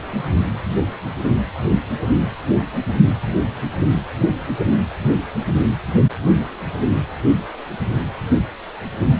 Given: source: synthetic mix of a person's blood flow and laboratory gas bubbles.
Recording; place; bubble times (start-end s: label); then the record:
Doppler ultrasound of blood flow; precordium
0.06-0.28 s: bubbles
From the record:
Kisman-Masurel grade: 111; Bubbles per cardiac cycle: 1 to 2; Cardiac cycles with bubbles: 1 to 10%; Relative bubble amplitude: barely perceptible (0.100 to 0.250); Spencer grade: 1 (occasional bubble signal discernible with the cardiac motion signal, with majority of cardiac periods free of bubbles); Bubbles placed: only in the low amplitude regions of the cardiac cycle